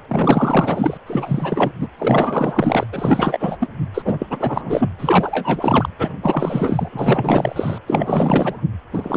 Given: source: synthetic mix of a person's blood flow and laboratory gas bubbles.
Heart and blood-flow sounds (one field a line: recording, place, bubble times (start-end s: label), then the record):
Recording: Doppler ultrasound of blood flow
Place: precordium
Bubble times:
0.08-0.97 s: bubbles
1.06-1.71 s: bubbles
1.78-1.88 s: bubbles
1.98-2.87 s: bubbles
2.92-3.70 s: bubbles
3.94-4.02 s: bubbles
4.04-4.26 s: bubbles
4.29-4.89 s: bubbles
4.98-5.89 s: bubbles
5.98-6.10 s: bubbles
6.22-6.89 s: bubbles
6.92-7.78 s: bubbles
7.87-8.61 s: bubbles
8.93-9.17 s: bubbles
From the record:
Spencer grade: 4 (maximum detectable bubble signal sounding continuously throughout systole and diastole of every cardiac period, and overriding the amplitude of the normal cardiac signals)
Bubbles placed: anywhere in the cardiac cycle